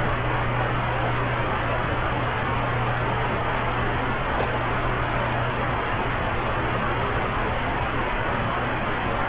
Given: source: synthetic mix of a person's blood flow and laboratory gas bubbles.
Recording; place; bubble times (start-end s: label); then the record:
Doppler ultrasound of blood flow; subclavian vein
4.36-4.47 s: bubbles
4.53-4.58 s: bubbles
From the record:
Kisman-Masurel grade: 111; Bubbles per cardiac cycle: 1 to 2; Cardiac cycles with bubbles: 1 to 10%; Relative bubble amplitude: barely perceptible (0.100 to 0.250); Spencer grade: 1 (occasional bubble signal discernible with the cardiac motion signal, with majority of cardiac periods free of bubbles); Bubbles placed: anywhere in the cardiac cycle